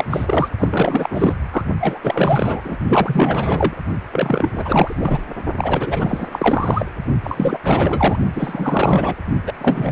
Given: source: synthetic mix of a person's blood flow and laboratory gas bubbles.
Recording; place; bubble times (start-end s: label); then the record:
Doppler ultrasound of blood flow; precordium
0.00-0.04 s: bubbles
0.10-0.49 s: bubbles
0.59-1.33 s: bubbles
1.52-1.62 s: bubbles
1.80-2.00 s: bubbles
2.02-2.61 s: bubbles
2.65-2.76 s: bubbles
2.88-3.77 s: bubbles
4.12-4.50 s: bubbles
4.55-5.23 s: bubbles
5.58-6.28 s: bubbles
6.32-6.86 s: bubbles
7.24-7.58 s: bubbles
7.63-8.17 s: bubbles
8.34-9.14 s: bubbles
9.46-9.53 s: bubbles
9.59-9.92 s: bubbles
From the record:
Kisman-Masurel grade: 444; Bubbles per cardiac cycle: continuous sound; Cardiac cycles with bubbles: 100%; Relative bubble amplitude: maximal (0.775 to 0.999); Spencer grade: 4 (maximum detectable bubble signal sounding continuously throughout systole and diastole of every cardiac period, and overriding the amplitude of the normal cardiac signals); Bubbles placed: only in the low amplitude regions of the cardiac cycle